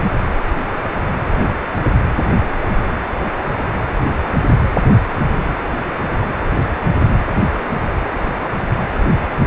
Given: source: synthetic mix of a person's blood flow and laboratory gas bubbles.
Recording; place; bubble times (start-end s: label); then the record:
Doppler ultrasound of blood flow; precordium
1.34-1.48 s: bubbles
From the record:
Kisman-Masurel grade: 111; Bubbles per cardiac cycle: 1 to 2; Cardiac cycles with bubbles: 1 to 10%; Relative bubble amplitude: barely perceptible (0.100 to 0.250); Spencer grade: 1 (occasional bubble signal discernible with the cardiac motion signal, with majority of cardiac periods free of bubbles); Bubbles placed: anywhere in the cardiac cycle